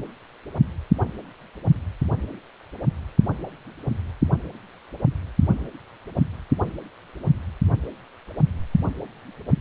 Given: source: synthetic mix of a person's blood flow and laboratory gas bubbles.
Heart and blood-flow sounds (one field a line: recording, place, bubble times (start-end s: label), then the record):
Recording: Doppler ultrasound of blood flow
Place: precordium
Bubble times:
no bubbles
From the record:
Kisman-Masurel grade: 000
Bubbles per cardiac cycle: 0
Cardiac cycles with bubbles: 0%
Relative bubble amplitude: no bubbles discernible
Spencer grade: 0 (complete lack of bubble signals)